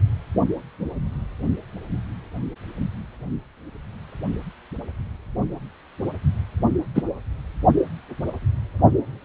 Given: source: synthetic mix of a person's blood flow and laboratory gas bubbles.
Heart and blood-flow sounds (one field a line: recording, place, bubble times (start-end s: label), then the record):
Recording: Doppler ultrasound of blood flow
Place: precordium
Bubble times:
6.95-7.02 s: bubbles
From the record:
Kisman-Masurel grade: 113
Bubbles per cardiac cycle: 1 to 2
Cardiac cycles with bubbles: 1 to 10%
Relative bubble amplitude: loud (0.450 to 0.775)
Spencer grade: 1 (occasional bubble signal discernible with the cardiac motion signal, with majority of cardiac periods free of bubbles)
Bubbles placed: only in the low amplitude regions of the cardiac cycle